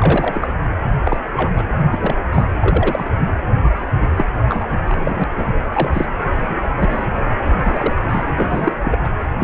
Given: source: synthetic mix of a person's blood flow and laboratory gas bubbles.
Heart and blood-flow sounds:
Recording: Doppler ultrasound of blood flow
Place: precordium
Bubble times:
0.00-0.54 s: bubbles
1.04-1.51 s: bubbles
1.54-1.62 s: bubbles
1.91-1.98 s: bubbles
2.00-2.17 s: bubbles
2.32-2.45 s: bubbles
2.60-3.31 s: bubbles
4.01-4.08 s: bubbles
4.16-4.25 s: bubbles
4.48-4.77 s: bubbles
4.86-5.24 s: bubbles
5.37-5.45 s: bubbles
5.73-6.05 s: bubbles
6.48-6.56 s: bubbles
6.77-7.05 s: bubbles
7.59-7.94 s: bubbles
8.09-8.24 s: bubbles
8.34-8.75 s: bubbles
8.84-8.98 s: bubbles
9.03-9.09 s: bubbles
9.37-9.44 s: bubbles
From the record:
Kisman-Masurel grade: 242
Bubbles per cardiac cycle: several, 3 to 8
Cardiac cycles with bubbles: 100%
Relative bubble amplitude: moderate (0.250 to 0.450)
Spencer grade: 3 (all of the cardiac periods contain showers or single bubble signals, but not dominating or overriding the cardiac motion signals)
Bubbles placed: anywhere in the cardiac cycle

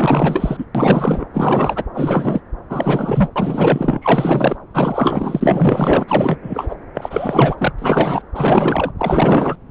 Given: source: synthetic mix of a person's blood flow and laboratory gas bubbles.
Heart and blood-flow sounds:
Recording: Doppler ultrasound of blood flow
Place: subclavian vein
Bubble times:
0.00-0.65 s: bubbles
0.74-1.26 s: bubbles
1.33-1.83 s: bubbles
1.93-2.42 s: bubbles
2.69-3.29 s: bubbles
3.35-4.57 s: bubbles
4.74-6.39 s: bubbles
6.43-6.75 s: bubbles
6.94-7.72 s: bubbles
7.78-8.22 s: bubbles
8.34-8.92 s: bubbles
8.98-9.56 s: bubbles
From the record:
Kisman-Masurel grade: 444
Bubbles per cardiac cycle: continuous sound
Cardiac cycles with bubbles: 100%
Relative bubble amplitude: maximal (0.775 to 0.999)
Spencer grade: 4 (maximum detectable bubble signal sounding continuously throughout systole and diastole of every cardiac period, and overriding the amplitude of the normal cardiac signals)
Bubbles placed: anywhere in the cardiac cycle

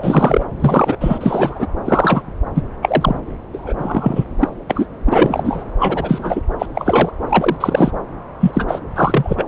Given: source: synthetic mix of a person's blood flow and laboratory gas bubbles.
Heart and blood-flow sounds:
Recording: Doppler ultrasound of blood flow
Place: subclavian vein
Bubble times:
0.00-0.46 s: bubbles
0.60-0.97 s: bubbles
1.00-1.67 s: bubbles
1.85-2.23 s: bubbles
2.54-2.62 s: bubbles
2.81-3.19 s: bubbles
3.53-3.73 s: bubbles
3.77-4.24 s: bubbles
4.39-4.49 s: bubbles
4.70-4.87 s: bubbles
5.05-5.64 s: bubbles
5.79-6.41 s: bubbles
6.58-6.66 s: bubbles
6.75-7.11 s: bubbles
7.29-7.57 s: bubbles
7.60-7.91 s: bubbles
8.40-8.80 s: bubbles
8.95-9.45 s: bubbles
From the record:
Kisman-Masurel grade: 243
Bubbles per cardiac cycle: several, 3 to 8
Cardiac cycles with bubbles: 100%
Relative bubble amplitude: loud (0.450 to 0.775)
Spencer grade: 3 (all of the cardiac periods contain showers or single bubble signals, but not dominating or overriding the cardiac motion signals)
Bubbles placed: anywhere in the cardiac cycle

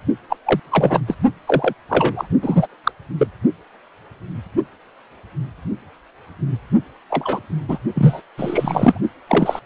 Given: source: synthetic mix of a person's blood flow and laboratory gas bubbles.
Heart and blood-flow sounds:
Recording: Doppler ultrasound of blood flow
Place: precordium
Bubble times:
0.29-0.37 s: bubbles
0.45-0.60 s: bubbles
0.71-1.00 s: bubbles
1.07-1.15 s: bubbles
1.47-1.73 s: bubbles
1.89-2.27 s: bubbles
2.42-2.67 s: bubbles
2.83-2.92 s: bubbles
3.17-3.27 s: bubbles
7.09-7.40 s: bubbles
7.68-7.78 s: bubbles
7.94-8.22 s: bubbles
8.38-9.02 s: bubbles
9.27-9.60 s: bubbles
From the record:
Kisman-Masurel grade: 233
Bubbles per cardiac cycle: several, 3 to 8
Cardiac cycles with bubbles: 50 to 99%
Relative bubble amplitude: loud (0.450 to 0.775)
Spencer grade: 3 (all of the cardiac periods contain showers or single bubble signals, but not dominating or overriding the cardiac motion signals)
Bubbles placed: only in the low amplitude regions of the cardiac cycle

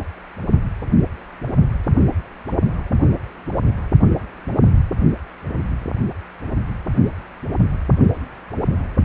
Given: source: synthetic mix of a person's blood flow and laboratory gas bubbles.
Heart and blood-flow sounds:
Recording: Doppler ultrasound of blood flow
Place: precordium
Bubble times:
no bubbles
From the record:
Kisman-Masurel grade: 000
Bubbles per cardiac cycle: 0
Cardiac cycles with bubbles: 0%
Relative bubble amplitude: no bubbles discernible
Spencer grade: 0 (complete lack of bubble signals)

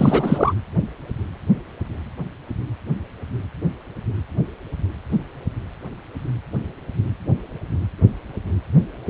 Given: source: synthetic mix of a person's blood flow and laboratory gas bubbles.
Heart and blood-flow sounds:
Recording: Doppler ultrasound of blood flow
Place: precordium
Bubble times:
0.00-0.54 s: bubbles
From the record:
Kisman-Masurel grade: 213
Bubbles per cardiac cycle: several, 3 to 8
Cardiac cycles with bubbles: 1 to 10%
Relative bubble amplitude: loud (0.450 to 0.775)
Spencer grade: 1 (occasional bubble signal discernible with the cardiac motion signal, with majority of cardiac periods free of bubbles)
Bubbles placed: anywhere in the cardiac cycle

